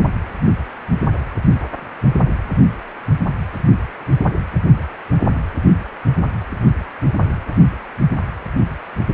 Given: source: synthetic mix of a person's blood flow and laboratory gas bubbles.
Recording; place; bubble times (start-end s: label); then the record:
Doppler ultrasound of blood flow; precordium
no bubbles
From the record:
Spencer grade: 0 (complete lack of bubble signals)